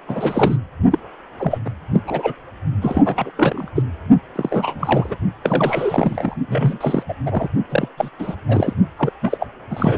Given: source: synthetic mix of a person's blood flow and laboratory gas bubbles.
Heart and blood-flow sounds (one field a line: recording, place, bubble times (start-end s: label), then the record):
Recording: Doppler ultrasound of blood flow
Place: precordium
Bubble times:
0.08-0.57 s: bubbles
0.91-0.98 s: bubbles
1.38-1.58 s: bubbles
1.65-1.70 s: bubbles
1.93-2.01 s: bubbles
2.07-2.35 s: bubbles
2.81-3.31 s: bubbles
3.36-3.69 s: bubbles
3.75-3.83 s: bubbles
4.35-5.17 s: bubbles
5.43-6.35 s: bubbles
6.48-6.78 s: bubbles
6.81-7.03 s: bubbles
7.08-7.14 s: bubbles
7.26-7.48 s: bubbles
7.70-7.89 s: bubbles
7.98-8.10 s: bubbles
8.19-8.36 s: bubbles
8.46-8.73 s: bubbles
8.98-9.12 s: bubbles
9.21-9.47 s: bubbles
9.70-9.98 s: bubbles
From the record:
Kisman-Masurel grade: 342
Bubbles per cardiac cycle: rolling drumbeat, 9 or more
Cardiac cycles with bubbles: 100%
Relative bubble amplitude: moderate (0.250 to 0.450)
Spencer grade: 3 (all of the cardiac periods contain showers or single bubble signals, but not dominating or overriding the cardiac motion signals)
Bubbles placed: only in the low amplitude regions of the cardiac cycle